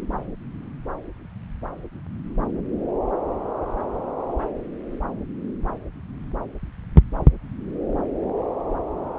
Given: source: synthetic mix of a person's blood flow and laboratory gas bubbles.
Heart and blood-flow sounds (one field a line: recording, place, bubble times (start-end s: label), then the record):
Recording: Doppler ultrasound of blood flow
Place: subclavian vein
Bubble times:
no bubbles
From the record:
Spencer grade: 0 (complete lack of bubble signals)